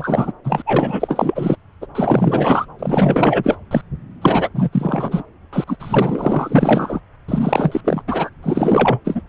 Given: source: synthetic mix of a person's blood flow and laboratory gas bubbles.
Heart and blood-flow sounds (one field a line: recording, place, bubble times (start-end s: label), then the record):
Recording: Doppler ultrasound of blood flow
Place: subclavian vein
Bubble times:
0.00-0.32 s: bubbles
0.44-0.62 s: bubbles
0.66-1.56 s: bubbles
1.82-1.86 s: bubbles
1.95-2.66 s: bubbles
2.79-3.58 s: bubbles
3.71-3.81 s: bubbles
4.21-4.50 s: bubbles
4.54-4.69 s: bubbles
4.72-5.23 s: bubbles
5.52-5.64 s: bubbles
5.67-5.76 s: bubbles
5.79-7.00 s: bubbles
7.28-7.81 s: bubbles
7.84-8.02 s: bubbles
8.07-8.29 s: bubbles
8.42-9.00 s: bubbles
9.04-9.21 s: bubbles
From the record:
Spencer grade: 4 (maximum detectable bubble signal sounding continuously throughout systole and diastole of every cardiac period, and overriding the amplitude of the normal cardiac signals)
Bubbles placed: anywhere in the cardiac cycle